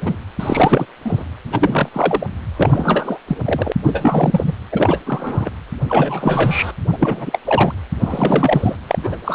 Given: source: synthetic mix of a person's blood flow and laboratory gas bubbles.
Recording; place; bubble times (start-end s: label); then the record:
Doppler ultrasound of blood flow; precordium
0.02-0.17 s: bubbles
0.39-0.86 s: bubbles
1.04-1.24 s: bubbles
1.52-1.89 s: bubbles
1.93-2.27 s: bubbles
2.56-3.18 s: bubbles
3.27-3.37 s: bubbles
3.44-3.72 s: bubbles
3.83-4.54 s: bubbles
4.72-5.00 s: bubbles
5.06-5.50 s: bubbles
5.88-6.72 s: bubbles
6.92-7.40 s: bubbles
7.45-7.72 s: bubbles
8.00-8.76 s: bubbles
8.87-8.99 s: bubbles
9.03-9.16 s: bubbles
9.24-9.35 s: bubbles
From the record:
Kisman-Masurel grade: 343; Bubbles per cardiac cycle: rolling drumbeat, 9 or more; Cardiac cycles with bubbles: 100%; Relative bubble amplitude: loud (0.450 to 0.775); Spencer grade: 3 (all of the cardiac periods contain showers or single bubble signals, but not dominating or overriding the cardiac motion signals); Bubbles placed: anywhere in the cardiac cycle